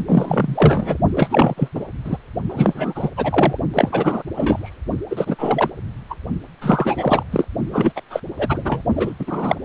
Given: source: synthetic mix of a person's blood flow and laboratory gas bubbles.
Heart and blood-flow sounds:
Doppler ultrasound of blood flow; precordium
0.07-0.98 s: bubbles
1.10-1.54 s: bubbles
1.57-1.69 s: bubbles
1.75-1.84 s: bubbles
2.04-2.17 s: bubbles
2.49-3.09 s: bubbles
3.17-3.57 s: bubbles
3.73-4.23 s: bubbles
4.35-4.75 s: bubbles
5.10-5.36 s: bubbles
5.38-5.70 s: bubbles
6.10-6.16 s: bubbles
6.61-7.23 s: bubbles
7.31-7.46 s: bubbles
7.71-7.92 s: bubbles
7.96-8.01 s: bubbles
8.10-8.21 s: bubbles
8.38-8.82 s: bubbles
8.96-9.13 s: bubbles
9.19-9.56 s: bubbles
From the record:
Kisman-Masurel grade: 343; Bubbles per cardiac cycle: rolling drumbeat, 9 or more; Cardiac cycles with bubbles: 100%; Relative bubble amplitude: loud (0.450 to 0.775); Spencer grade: 3 (all of the cardiac periods contain showers or single bubble signals, but not dominating or overriding the cardiac motion signals); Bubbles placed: only in the low amplitude regions of the cardiac cycle

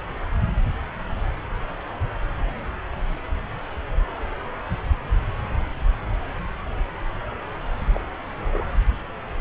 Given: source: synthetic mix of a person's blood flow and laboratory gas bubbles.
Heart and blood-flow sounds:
Doppler ultrasound of blood flow; subclavian vein
7.94-7.99 s: bubbles
8.53-8.63 s: bubbles
From the record:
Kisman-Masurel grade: 111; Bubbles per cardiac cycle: 1 to 2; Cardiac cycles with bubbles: 1 to 10%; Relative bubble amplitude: barely perceptible (0.100 to 0.250); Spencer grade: 1 (occasional bubble signal discernible with the cardiac motion signal, with majority of cardiac periods free of bubbles); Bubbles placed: anywhere in the cardiac cycle

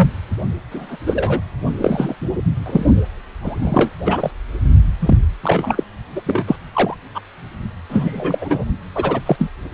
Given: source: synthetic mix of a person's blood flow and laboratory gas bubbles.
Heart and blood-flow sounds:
Doppler ultrasound of blood flow; precordium
0.00-0.10 s: bubbles
0.71-0.96 s: bubbles
1.06-1.40 s: bubbles
1.80-2.15 s: bubbles
2.66-2.85 s: bubbles
3.41-3.90 s: bubbles
4.05-4.31 s: bubbles
5.00-5.19 s: bubbles
5.43-5.83 s: bubbles
6.15-6.21 s: bubbles
6.26-6.45 s: bubbles
6.47-6.56 s: bubbles
6.73-6.95 s: bubbles
7.15-7.21 s: bubbles
7.90-8.64 s: bubbles
8.95-9.21 s: bubbles
9.25-9.36 s: bubbles
9.38-9.50 s: bubbles
From the record:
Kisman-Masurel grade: 243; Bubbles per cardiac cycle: several, 3 to 8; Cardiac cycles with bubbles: 100%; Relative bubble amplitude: loud (0.450 to 0.775); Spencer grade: 3 (all of the cardiac periods contain showers or single bubble signals, but not dominating or overriding the cardiac motion signals); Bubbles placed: only in the low amplitude regions of the cardiac cycle

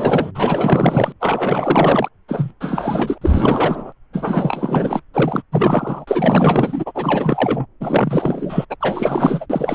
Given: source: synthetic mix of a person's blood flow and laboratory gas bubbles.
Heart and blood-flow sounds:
Doppler ultrasound of blood flow; subclavian vein
0.00-0.31 s: bubbles
0.34-1.12 s: bubbles
1.20-2.08 s: bubbles
2.28-2.53 s: bubbles
2.60-3.18 s: bubbles
3.21-3.92 s: bubbles
4.13-5.01 s: bubbles
5.14-5.42 s: bubbles
5.52-7.66 s: bubbles
7.80-8.65 s: bubbles
8.70-8.76 s: bubbles
8.80-9.46 s: bubbles
9.50-9.75 s: bubbles
From the record:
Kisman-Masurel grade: 444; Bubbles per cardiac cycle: continuous sound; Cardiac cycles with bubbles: 100%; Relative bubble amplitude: maximal (0.775 to 0.999); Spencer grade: 4 (maximum detectable bubble signal sounding continuously throughout systole and diastole of every cardiac period, and overriding the amplitude of the normal cardiac signals); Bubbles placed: anywhere in the cardiac cycle

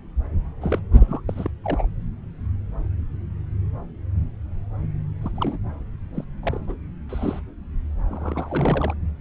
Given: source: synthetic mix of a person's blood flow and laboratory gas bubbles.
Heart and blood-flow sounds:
Doppler ultrasound of blood flow; subclavian vein
0.61-0.79 s: bubbles
1.00-1.20 s: bubbles
1.28-1.49 s: bubbles
1.64-1.88 s: bubbles
5.21-5.31 s: bubbles
5.35-5.58 s: bubbles
6.14-6.24 s: bubbles
6.43-6.76 s: bubbles
7.09-7.39 s: bubbles
8.07-8.94 s: bubbles
From the record:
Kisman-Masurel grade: 221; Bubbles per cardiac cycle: several, 3 to 8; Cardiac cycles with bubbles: 10 to 50%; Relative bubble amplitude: barely perceptible (0.100 to 0.250); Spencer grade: 2 (many but less than half of the cardiac periods contain bubble signals, singularly or in groups); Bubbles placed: anywhere in the cardiac cycle

